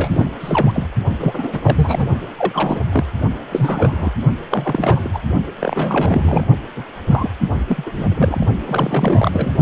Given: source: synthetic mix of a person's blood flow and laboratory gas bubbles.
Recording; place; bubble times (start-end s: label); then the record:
Doppler ultrasound of blood flow; precordium
0.00-0.31 s: bubbles
0.40-0.87 s: bubbles
1.19-2.08 s: bubbles
2.38-2.81 s: bubbles
2.92-3.04 s: bubbles
3.41-4.11 s: bubbles
4.49-5.19 s: bubbles
5.59-6.46 s: bubbles
6.75-6.83 s: bubbles
7.09-7.29 s: bubbles
7.67-8.04 s: bubbles
8.10-8.46 s: bubbles
8.66-9.52 s: bubbles
From the record:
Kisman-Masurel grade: 342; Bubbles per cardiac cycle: rolling drumbeat, 9 or more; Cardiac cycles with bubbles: 100%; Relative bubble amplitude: moderate (0.250 to 0.450); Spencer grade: 3 (all of the cardiac periods contain showers or single bubble signals, but not dominating or overriding the cardiac motion signals); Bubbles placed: only in the low amplitude regions of the cardiac cycle